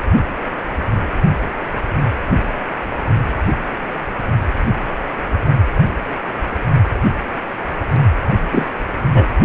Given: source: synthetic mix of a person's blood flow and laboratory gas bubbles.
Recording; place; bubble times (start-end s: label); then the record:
Doppler ultrasound of blood flow; precordium
8.51-8.67 s: bubbles
9.13-9.25 s: bubbles
From the record:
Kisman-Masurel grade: 123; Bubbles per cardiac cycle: 1 to 2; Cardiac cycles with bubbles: 10 to 50%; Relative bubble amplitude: loud (0.450 to 0.775); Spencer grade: 2 (many but less than half of the cardiac periods contain bubble signals, singularly or in groups); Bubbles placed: only in the low amplitude regions of the cardiac cycle